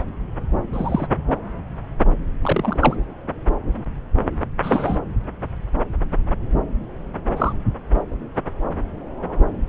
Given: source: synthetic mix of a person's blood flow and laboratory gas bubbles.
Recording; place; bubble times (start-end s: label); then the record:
Doppler ultrasound of blood flow; subclavian vein
0.00-0.05 s: bubbles
0.73-1.06 s: bubbles
2.42-2.97 s: bubbles
4.62-4.98 s: bubbles
7.37-7.53 s: bubbles
From the record:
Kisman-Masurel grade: 123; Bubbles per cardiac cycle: 1 to 2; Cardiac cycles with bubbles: 10 to 50%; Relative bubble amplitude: loud (0.450 to 0.775); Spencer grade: 2 (many but less than half of the cardiac periods contain bubble signals, singularly or in groups); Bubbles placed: anywhere in the cardiac cycle